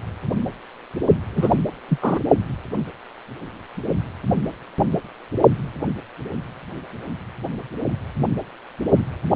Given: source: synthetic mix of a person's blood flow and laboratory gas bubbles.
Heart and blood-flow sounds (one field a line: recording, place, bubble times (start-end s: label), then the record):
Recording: Doppler ultrasound of blood flow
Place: precordium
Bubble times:
1.34-1.56 s: bubbles
1.88-1.99 s: bubbles
2.01-2.19 s: bubbles
From the record:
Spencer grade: 1 (occasional bubble signal discernible with the cardiac motion signal, with majority of cardiac periods free of bubbles)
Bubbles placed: only in the low amplitude regions of the cardiac cycle